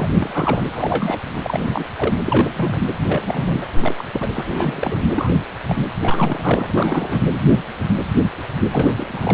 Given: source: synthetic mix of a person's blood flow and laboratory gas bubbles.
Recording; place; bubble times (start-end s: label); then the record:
Doppler ultrasound of blood flow; precordium
0.00-0.11 s: bubbles
0.16-0.64 s: bubbles
0.70-1.20 s: bubbles
1.44-1.84 s: bubbles
1.96-2.16 s: bubbles
2.25-2.83 s: bubbles
3.09-3.56 s: bubbles
3.60-3.66 s: bubbles
3.80-3.94 s: bubbles
3.97-4.04 s: bubbles
4.13-4.28 s: bubbles
4.33-4.44 s: bubbles
4.51-5.00 s: bubbles
5.14-5.30 s: bubbles
5.67-5.75 s: bubbles
6.02-7.25 s: bubbles
8.73-9.34 s: bubbles
From the record:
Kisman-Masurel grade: 232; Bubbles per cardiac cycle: several, 3 to 8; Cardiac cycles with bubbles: 50 to 99%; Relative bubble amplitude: moderate (0.250 to 0.450); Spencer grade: 3 (all of the cardiac periods contain showers or single bubble signals, but not dominating or overriding the cardiac motion signals); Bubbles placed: anywhere in the cardiac cycle